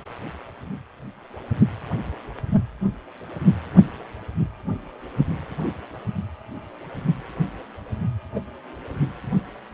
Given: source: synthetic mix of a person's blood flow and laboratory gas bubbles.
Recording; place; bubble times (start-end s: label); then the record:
Doppler ultrasound of blood flow; precordium
8.34-8.40 s: bubbles
From the record:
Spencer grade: 1 (occasional bubble signal discernible with the cardiac motion signal, with majority of cardiac periods free of bubbles); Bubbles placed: anywhere in the cardiac cycle